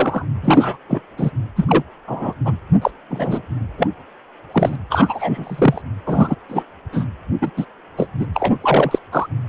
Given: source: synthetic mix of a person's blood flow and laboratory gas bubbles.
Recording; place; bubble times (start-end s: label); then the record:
Doppler ultrasound of blood flow; precordium
0.00-0.26 s: bubbles
0.42-0.78 s: bubbles
0.89-1.00 s: bubbles
1.17-1.30 s: bubbles
1.56-1.66 s: bubbles
1.68-1.83 s: bubbles
2.07-2.33 s: bubbles
2.45-2.53 s: bubbles
2.81-2.91 s: bubbles
3.10-3.41 s: bubbles
3.78-3.87 s: bubbles
4.52-4.75 s: bubbles
4.90-5.82 s: bubbles
6.06-6.35 s: bubbles
6.49-6.63 s: bubbles
6.92-7.06 s: bubbles
7.41-7.51 s: bubbles
7.57-7.66 s: bubbles
7.97-8.06 s: bubbles
8.19-8.27 s: bubbles
8.34-8.56 s: bubbles
8.61-8.98 s: bubbles
9.12-9.27 s: bubbles
From the record:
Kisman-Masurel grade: 243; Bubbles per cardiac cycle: several, 3 to 8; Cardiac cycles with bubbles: 100%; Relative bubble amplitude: loud (0.450 to 0.775); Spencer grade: 3 (all of the cardiac periods contain showers or single bubble signals, but not dominating or overriding the cardiac motion signals); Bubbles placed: anywhere in the cardiac cycle